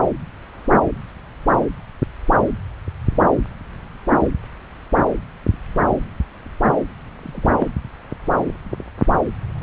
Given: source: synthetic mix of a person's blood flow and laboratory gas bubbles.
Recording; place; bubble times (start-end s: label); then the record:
Doppler ultrasound of blood flow; subclavian vein
7.22-7.68 s: bubbles
From the record:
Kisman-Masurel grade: 122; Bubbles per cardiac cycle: 1 to 2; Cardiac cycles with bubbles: 10 to 50%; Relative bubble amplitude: moderate (0.250 to 0.450); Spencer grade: 2 (many but less than half of the cardiac periods contain bubble signals, singularly or in groups); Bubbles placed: anywhere in the cardiac cycle